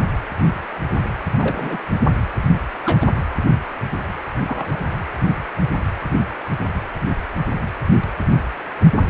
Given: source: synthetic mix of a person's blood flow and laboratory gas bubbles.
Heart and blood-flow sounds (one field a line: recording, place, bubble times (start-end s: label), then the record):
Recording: Doppler ultrasound of blood flow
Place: precordium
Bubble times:
1.37-1.78 s: bubbles
2.85-3.09 s: bubbles
4.46-4.83 s: bubbles
From the record:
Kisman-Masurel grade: 121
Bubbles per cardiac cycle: 1 to 2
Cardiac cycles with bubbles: 10 to 50%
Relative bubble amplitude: barely perceptible (0.100 to 0.250)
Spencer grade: 2 (many but less than half of the cardiac periods contain bubble signals, singularly or in groups)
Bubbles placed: anywhere in the cardiac cycle